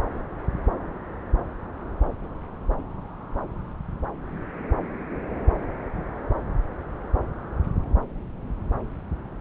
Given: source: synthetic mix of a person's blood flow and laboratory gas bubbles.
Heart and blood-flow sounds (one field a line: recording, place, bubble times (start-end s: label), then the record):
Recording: Doppler ultrasound of blood flow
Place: subclavian vein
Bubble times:
no bubbles
From the record:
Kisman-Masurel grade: 000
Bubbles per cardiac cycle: 0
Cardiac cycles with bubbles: 0%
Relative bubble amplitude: no bubbles discernible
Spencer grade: 0 (complete lack of bubble signals)